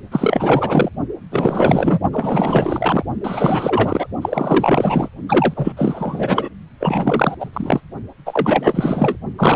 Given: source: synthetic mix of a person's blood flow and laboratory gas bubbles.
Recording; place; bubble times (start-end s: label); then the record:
Doppler ultrasound of blood flow; precordium
0.12-0.90 s: bubbles
1.31-2.00 s: bubbles
2.12-3.06 s: bubbles
3.23-4.08 s: bubbles
4.21-5.08 s: bubbles
5.29-5.72 s: bubbles
5.76-6.49 s: bubbles
6.79-7.34 s: bubbles
7.40-7.50 s: bubbles
7.53-7.81 s: bubbles
8.25-9.17 s: bubbles
9.38-9.56 s: bubbles
From the record:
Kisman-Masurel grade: 444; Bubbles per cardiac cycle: continuous sound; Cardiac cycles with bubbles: 100%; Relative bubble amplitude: maximal (0.775 to 0.999); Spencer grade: 4 (maximum detectable bubble signal sounding continuously throughout systole and diastole of every cardiac period, and overriding the amplitude of the normal cardiac signals); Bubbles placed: only in the low amplitude regions of the cardiac cycle